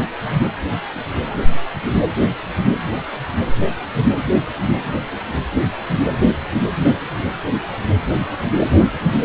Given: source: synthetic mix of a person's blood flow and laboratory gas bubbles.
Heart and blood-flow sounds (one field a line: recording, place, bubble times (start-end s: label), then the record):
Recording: Doppler ultrasound of blood flow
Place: precordium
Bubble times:
8.74-8.89 s: bubbles
From the record:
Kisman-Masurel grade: 111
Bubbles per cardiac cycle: 1 to 2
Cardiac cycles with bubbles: 1 to 10%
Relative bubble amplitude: barely perceptible (0.100 to 0.250)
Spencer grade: 1 (occasional bubble signal discernible with the cardiac motion signal, with majority of cardiac periods free of bubbles)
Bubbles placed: anywhere in the cardiac cycle